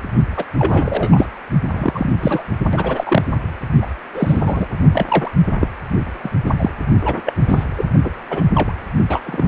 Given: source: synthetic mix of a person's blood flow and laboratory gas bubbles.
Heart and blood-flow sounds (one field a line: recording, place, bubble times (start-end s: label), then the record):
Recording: Doppler ultrasound of blood flow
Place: precordium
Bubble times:
0.36-0.44 s: bubbles
0.58-1.28 s: bubbles
1.71-2.09 s: bubbles
2.20-2.45 s: bubbles
2.72-3.23 s: bubbles
3.81-3.86 s: bubbles
4.14-4.66 s: bubbles
4.92-5.05 s: bubbles
5.08-5.31 s: bubbles
5.61-5.67 s: bubbles
6.23-6.29 s: bubbles
6.46-6.51 s: bubbles
6.59-6.71 s: bubbles
7.02-7.22 s: bubbles
7.25-7.33 s: bubbles
7.48-7.65 s: bubbles
7.77-7.84 s: bubbles
8.04-8.10 s: bubbles
8.30-8.44 s: bubbles
8.54-8.74 s: bubbles
9.09-9.21 s: bubbles
9.26-9.48 s: bubbles
From the record:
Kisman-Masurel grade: 243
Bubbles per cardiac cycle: several, 3 to 8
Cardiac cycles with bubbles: 100%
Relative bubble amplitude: loud (0.450 to 0.775)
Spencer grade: 3 (all of the cardiac periods contain showers or single bubble signals, but not dominating or overriding the cardiac motion signals)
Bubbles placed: only in the low amplitude regions of the cardiac cycle